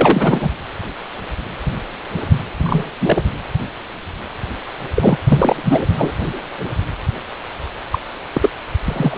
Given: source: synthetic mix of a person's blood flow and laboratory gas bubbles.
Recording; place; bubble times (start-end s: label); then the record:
Doppler ultrasound of blood flow; precordium
0.00-0.49 s: bubbles
2.62-2.85 s: bubbles
3.01-3.22 s: bubbles
4.94-5.18 s: bubbles
5.27-5.86 s: bubbles
5.97-6.13 s: bubbles
7.91-7.99 s: bubbles
8.34-8.49 s: bubbles
8.87-9.18 s: bubbles
From the record:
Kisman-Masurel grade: 223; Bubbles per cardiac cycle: several, 3 to 8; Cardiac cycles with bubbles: 10 to 50%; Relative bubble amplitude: loud (0.450 to 0.775); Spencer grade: 2 (many but less than half of the cardiac periods contain bubble signals, singularly or in groups); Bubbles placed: anywhere in the cardiac cycle